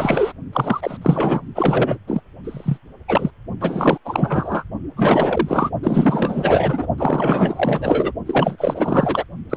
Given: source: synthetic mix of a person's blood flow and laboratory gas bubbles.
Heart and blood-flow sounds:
Doppler ultrasound of blood flow; precordium
0.00-0.33 s: bubbles
0.52-0.98 s: bubbles
1.01-1.42 s: bubbles
1.55-1.98 s: bubbles
2.07-2.21 s: bubbles
2.44-2.79 s: bubbles
3.08-3.31 s: bubbles
3.60-3.98 s: bubbles
4.05-4.64 s: bubbles
4.97-5.71 s: bubbles
5.83-6.87 s: bubbles
6.98-8.12 s: bubbles
8.25-9.24 s: bubbles
9.49-9.57 s: bubbles
From the record:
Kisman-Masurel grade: 444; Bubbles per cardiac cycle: continuous sound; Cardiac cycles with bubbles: 100%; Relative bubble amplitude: maximal (0.775 to 0.999); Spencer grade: 4 (maximum detectable bubble signal sounding continuously throughout systole and diastole of every cardiac period, and overriding the amplitude of the normal cardiac signals); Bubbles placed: only in the low amplitude regions of the cardiac cycle

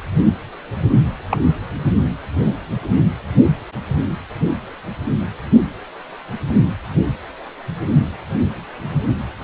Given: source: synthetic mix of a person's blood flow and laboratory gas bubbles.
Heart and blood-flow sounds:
Doppler ultrasound of blood flow; precordium
1.29-1.38 s: bubbles
From the record:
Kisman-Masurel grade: 112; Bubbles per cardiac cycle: 1 to 2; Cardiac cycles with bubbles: 1 to 10%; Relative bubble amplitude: moderate (0.250 to 0.450); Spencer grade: 1 (occasional bubble signal discernible with the cardiac motion signal, with majority of cardiac periods free of bubbles); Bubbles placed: only in the low amplitude regions of the cardiac cycle

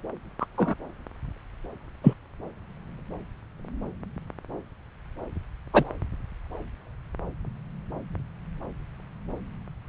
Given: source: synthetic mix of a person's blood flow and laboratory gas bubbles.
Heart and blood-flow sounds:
Doppler ultrasound of blood flow; subclavian vein
0.40-0.45 s: bubbles
0.57-0.74 s: bubbles
2.04-2.13 s: bubbles
5.73-5.84 s: bubbles
From the record:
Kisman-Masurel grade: 123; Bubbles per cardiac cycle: 1 to 2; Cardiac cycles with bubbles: 10 to 50%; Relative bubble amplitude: loud (0.450 to 0.775); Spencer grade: 2 (many but less than half of the cardiac periods contain bubble signals, singularly or in groups); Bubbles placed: anywhere in the cardiac cycle

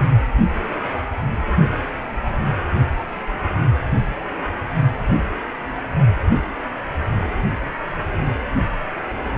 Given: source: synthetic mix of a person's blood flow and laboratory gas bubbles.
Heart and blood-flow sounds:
Doppler ultrasound of blood flow; precordium
no bubbles
From the record:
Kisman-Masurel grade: 000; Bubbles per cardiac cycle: 0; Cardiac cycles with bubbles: 0%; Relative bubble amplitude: no bubbles discernible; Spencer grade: 0 (complete lack of bubble signals)

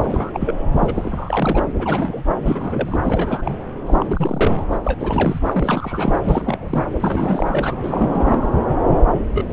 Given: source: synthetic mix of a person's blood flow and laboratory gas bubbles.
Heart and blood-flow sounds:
Doppler ultrasound of blood flow; subclavian vein
0.00-0.54 s: bubbles
0.78-1.59 s: bubbles
1.78-2.25 s: bubbles
2.46-2.99 s: bubbles
3.03-3.52 s: bubbles
3.86-4.63 s: bubbles
4.71-4.79 s: bubbles
4.84-5.39 s: bubbles
5.46-6.84 s: bubbles
7.00-7.75 s: bubbles
7.83-8.50 s: bubbles
8.89-8.99 s: bubbles
9.11-9.21 s: bubbles
9.34-9.46 s: bubbles
From the record:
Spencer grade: 3 (all of the cardiac periods contain showers or single bubble signals, but not dominating or overriding the cardiac motion signals); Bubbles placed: anywhere in the cardiac cycle

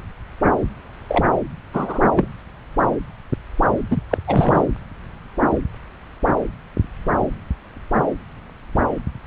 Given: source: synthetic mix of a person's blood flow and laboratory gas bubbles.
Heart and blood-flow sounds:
Doppler ultrasound of blood flow; subclavian vein
1.08-1.24 s: bubbles
1.74-1.99 s: bubbles
2.17-2.27 s: bubbles
3.90-4.00 s: bubbles
4.09-4.17 s: bubbles
4.27-4.64 s: bubbles
From the record:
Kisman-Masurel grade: 223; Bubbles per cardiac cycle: several, 3 to 8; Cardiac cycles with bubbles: 10 to 50%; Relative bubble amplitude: loud (0.450 to 0.775); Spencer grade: 2 (many but less than half of the cardiac periods contain bubble signals, singularly or in groups); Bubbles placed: anywhere in the cardiac cycle

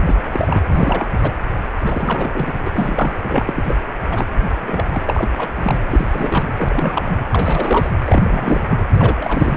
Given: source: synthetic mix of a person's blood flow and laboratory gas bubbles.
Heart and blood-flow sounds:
Doppler ultrasound of blood flow; precordium
0.05-0.15 s: bubbles
0.25-0.62 s: bubbles
0.68-1.07 s: bubbles
1.22-1.32 s: bubbles
1.86-2.54 s: bubbles
2.66-3.15 s: bubbles
3.22-3.80 s: bubbles
4.10-4.26 s: bubbles
4.60-4.85 s: bubbles
4.92-5.02 s: bubbles
5.06-5.28 s: bubbles
5.37-5.80 s: bubbles
5.89-6.55 s: bubbles
6.57-7.25 s: bubbles
7.32-7.91 s: bubbles
8.05-8.86 s: bubbles
8.94-9.57 s: bubbles
From the record:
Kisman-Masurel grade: 342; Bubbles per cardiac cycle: rolling drumbeat, 9 or more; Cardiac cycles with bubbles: 100%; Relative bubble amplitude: moderate (0.250 to 0.450); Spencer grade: 3 (all of the cardiac periods contain showers or single bubble signals, but not dominating or overriding the cardiac motion signals); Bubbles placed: anywhere in the cardiac cycle

